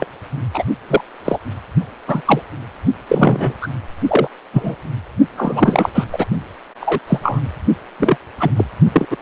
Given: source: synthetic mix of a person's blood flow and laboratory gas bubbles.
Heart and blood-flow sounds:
Doppler ultrasound of blood flow; precordium
0.00-0.06 s: bubbles
0.54-0.64 s: bubbles
0.88-1.01 s: bubbles
1.25-1.39 s: bubbles
2.08-2.22 s: bubbles
2.25-2.42 s: bubbles
3.09-3.54 s: bubbles
3.60-3.68 s: bubbles
4.07-4.27 s: bubbles
4.53-4.75 s: bubbles
5.37-5.89 s: bubbles
5.94-6.05 s: bubbles
6.12-6.25 s: bubbles
6.80-6.99 s: bubbles
7.07-7.19 s: bubbles
7.22-7.40 s: bubbles
8.00-8.17 s: bubbles
8.39-8.51 s: bubbles
8.56-8.65 s: bubbles
8.93-9.05 s: bubbles
9.10-9.17 s: bubbles
From the record:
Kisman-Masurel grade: 243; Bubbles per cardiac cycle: several, 3 to 8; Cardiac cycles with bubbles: 100%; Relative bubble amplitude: loud (0.450 to 0.775); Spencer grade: 3 (all of the cardiac periods contain showers or single bubble signals, but not dominating or overriding the cardiac motion signals); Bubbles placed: only in the low amplitude regions of the cardiac cycle

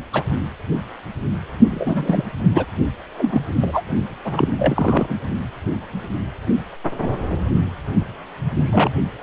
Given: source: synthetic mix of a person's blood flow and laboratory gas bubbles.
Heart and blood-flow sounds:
Doppler ultrasound of blood flow; precordium
0.13-0.24 s: bubbles
1.70-2.23 s: bubbles
2.54-2.66 s: bubbles
3.15-3.42 s: bubbles
3.61-3.82 s: bubbles
4.25-4.48 s: bubbles
4.58-5.16 s: bubbles
8.65-9.04 s: bubbles
From the record:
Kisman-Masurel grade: 232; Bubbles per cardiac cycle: several, 3 to 8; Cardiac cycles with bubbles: 50 to 99%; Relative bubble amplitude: moderate (0.250 to 0.450); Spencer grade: 3 (all of the cardiac periods contain showers or single bubble signals, but not dominating or overriding the cardiac motion signals); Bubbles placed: only in the low amplitude regions of the cardiac cycle

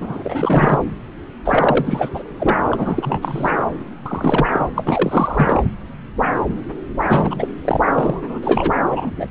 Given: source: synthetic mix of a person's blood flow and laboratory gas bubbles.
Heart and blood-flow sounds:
Doppler ultrasound of blood flow; subclavian vein
0.01-0.82 s: bubbles
1.44-2.08 s: bubbles
2.14-2.23 s: bubbles
2.39-2.57 s: bubbles
2.70-3.51 s: bubbles
4.05-4.46 s: bubbles
4.53-4.66 s: bubbles
4.75-5.63 s: bubbles
7.07-7.48 s: bubbles
7.65-7.80 s: bubbles
7.91-8.39 s: bubbles
8.42-8.73 s: bubbles
8.90-9.10 s: bubbles
9.16-9.26 s: bubbles
From the record:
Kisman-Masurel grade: 333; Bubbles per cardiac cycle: rolling drumbeat, 9 or more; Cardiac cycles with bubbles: 50 to 99%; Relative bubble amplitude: loud (0.450 to 0.775); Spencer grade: 3 (all of the cardiac periods contain showers or single bubble signals, but not dominating or overriding the cardiac motion signals); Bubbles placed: anywhere in the cardiac cycle

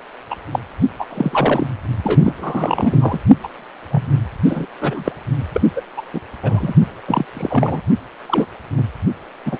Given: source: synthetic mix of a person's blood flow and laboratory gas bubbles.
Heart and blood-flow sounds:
Doppler ultrasound of blood flow; precordium
0.30-0.35 s: bubbles
0.52-0.59 s: bubbles
0.99-1.04 s: bubbles
1.09-1.67 s: bubbles
2.04-2.34 s: bubbles
2.37-3.18 s: bubbles
3.43-3.48 s: bubbles
3.91-4.20 s: bubbles
4.46-4.66 s: bubbles
4.81-5.12 s: bubbles
5.53-5.61 s: bubbles
5.75-5.82 s: bubbles
5.96-6.01 s: bubbles
6.12-6.21 s: bubbles
6.42-6.74 s: bubbles
7.07-7.25 s: bubbles
7.33-7.81 s: bubbles
8.28-8.46 s: bubbles
8.78-8.83 s: bubbles
9.46-9.58 s: bubbles
From the record:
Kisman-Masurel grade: 243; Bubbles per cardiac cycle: several, 3 to 8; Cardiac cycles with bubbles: 100%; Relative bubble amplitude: loud (0.450 to 0.775); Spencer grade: 3 (all of the cardiac periods contain showers or single bubble signals, but not dominating or overriding the cardiac motion signals); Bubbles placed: only in the low amplitude regions of the cardiac cycle

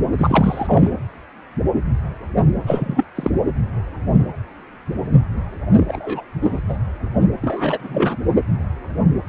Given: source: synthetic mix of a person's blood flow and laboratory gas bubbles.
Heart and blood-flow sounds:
Doppler ultrasound of blood flow; precordium
0.18-0.90 s: bubbles
2.67-3.04 s: bubbles
3.15-3.31 s: bubbles
5.72-6.22 s: bubbles
6.42-6.60 s: bubbles
6.69-6.76 s: bubbles
7.42-8.17 s: bubbles
From the record:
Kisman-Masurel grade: 223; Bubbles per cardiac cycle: several, 3 to 8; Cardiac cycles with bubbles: 10 to 50%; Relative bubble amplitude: loud (0.450 to 0.775); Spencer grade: 2 (many but less than half of the cardiac periods contain bubble signals, singularly or in groups); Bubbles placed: anywhere in the cardiac cycle

